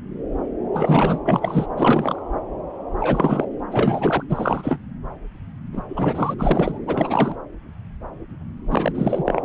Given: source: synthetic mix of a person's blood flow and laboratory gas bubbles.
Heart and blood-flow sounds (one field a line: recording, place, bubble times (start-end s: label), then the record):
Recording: Doppler ultrasound of blood flow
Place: subclavian vein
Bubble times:
0.73-1.19 s: bubbles
1.24-1.66 s: bubbles
1.77-2.19 s: bubbles
3.00-3.46 s: bubbles
3.71-4.24 s: bubbles
4.29-4.79 s: bubbles
5.73-5.83 s: bubbles
5.89-6.34 s: bubbles
6.39-6.80 s: bubbles
6.87-7.38 s: bubbles
8.71-8.92 s: bubbles
8.95-9.40 s: bubbles
From the record:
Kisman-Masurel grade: 332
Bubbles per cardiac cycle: rolling drumbeat, 9 or more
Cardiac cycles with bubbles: 50 to 99%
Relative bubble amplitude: moderate (0.250 to 0.450)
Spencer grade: 3 (all of the cardiac periods contain showers or single bubble signals, but not dominating or overriding the cardiac motion signals)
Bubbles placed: anywhere in the cardiac cycle